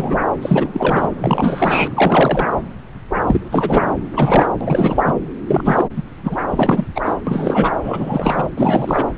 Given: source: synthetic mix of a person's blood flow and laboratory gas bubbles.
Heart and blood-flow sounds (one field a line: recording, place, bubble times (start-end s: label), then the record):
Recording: Doppler ultrasound of blood flow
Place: subclavian vein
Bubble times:
0.00-0.18 s: bubbles
0.41-1.09 s: bubbles
1.18-2.48 s: bubbles
3.27-3.86 s: bubbles
4.16-4.50 s: bubbles
4.61-5.14 s: bubbles
5.48-5.89 s: bubbles
5.96-6.03 s: bubbles
6.24-6.37 s: bubbles
6.50-6.86 s: bubbles
6.95-7.01 s: bubbles
7.05-7.15 s: bubbles
7.27-7.71 s: bubbles
7.83-8.46 s: bubbles
8.57-9.04 s: bubbles
From the record:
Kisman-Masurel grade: 333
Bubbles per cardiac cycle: rolling drumbeat, 9 or more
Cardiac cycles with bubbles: 50 to 99%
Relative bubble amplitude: loud (0.450 to 0.775)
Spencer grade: 3 (all of the cardiac periods contain showers or single bubble signals, but not dominating or overriding the cardiac motion signals)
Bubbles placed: anywhere in the cardiac cycle